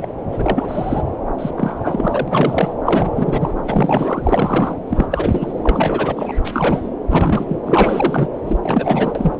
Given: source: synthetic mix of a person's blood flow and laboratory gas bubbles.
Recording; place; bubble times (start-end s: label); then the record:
Doppler ultrasound of blood flow; subclavian vein
0.00-0.12 s: bubbles
0.32-1.02 s: bubbles
1.38-1.50 s: bubbles
1.56-2.73 s: bubbles
2.85-3.11 s: bubbles
3.15-3.52 s: bubbles
3.63-4.78 s: bubbles
4.89-5.53 s: bubbles
5.63-6.33 s: bubbles
6.44-6.89 s: bubbles
7.08-7.59 s: bubbles
7.66-8.29 s: bubbles
8.47-8.57 s: bubbles
8.62-9.38 s: bubbles
From the record:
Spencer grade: 3 (all of the cardiac periods contain showers or single bubble signals, but not dominating or overriding the cardiac motion signals); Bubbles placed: anywhere in the cardiac cycle